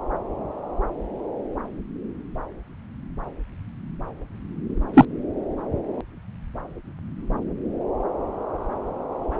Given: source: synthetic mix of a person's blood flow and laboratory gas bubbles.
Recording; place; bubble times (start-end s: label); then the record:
Doppler ultrasound of blood flow; subclavian vein
4.93-5.05 s: bubbles
From the record:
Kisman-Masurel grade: 113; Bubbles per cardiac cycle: 1 to 2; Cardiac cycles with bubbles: 1 to 10%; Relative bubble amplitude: loud (0.450 to 0.775); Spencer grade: 1 (occasional bubble signal discernible with the cardiac motion signal, with majority of cardiac periods free of bubbles); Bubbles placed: anywhere in the cardiac cycle